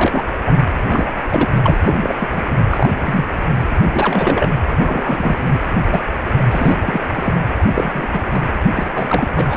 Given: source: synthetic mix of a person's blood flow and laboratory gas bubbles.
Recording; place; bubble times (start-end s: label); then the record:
Doppler ultrasound of blood flow; precordium
0.00-0.24 s: bubbles
0.45-0.68 s: bubbles
0.77-1.11 s: bubbles
1.31-1.51 s: bubbles
1.64-1.78 s: bubbles
1.85-2.14 s: bubbles
2.20-2.29 s: bubbles
2.35-2.42 s: bubbles
2.70-2.89 s: bubbles
3.01-3.26 s: bubbles
3.44-3.49 s: bubbles
3.81-4.50 s: bubbles
4.86-5.58 s: bubbles
5.84-6.05 s: bubbles
6.38-6.43 s: bubbles
6.51-7.00 s: bubbles
7.15-7.34 s: bubbles
7.59-7.64 s: bubbles
7.74-8.42 s: bubbles
8.76-8.90 s: bubbles
8.94-9.28 s: bubbles
9.36-9.56 s: bubbles
From the record:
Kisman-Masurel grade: 242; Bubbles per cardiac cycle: several, 3 to 8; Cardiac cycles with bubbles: 100%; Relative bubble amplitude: moderate (0.250 to 0.450); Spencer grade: 3 (all of the cardiac periods contain showers or single bubble signals, but not dominating or overriding the cardiac motion signals); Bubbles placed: anywhere in the cardiac cycle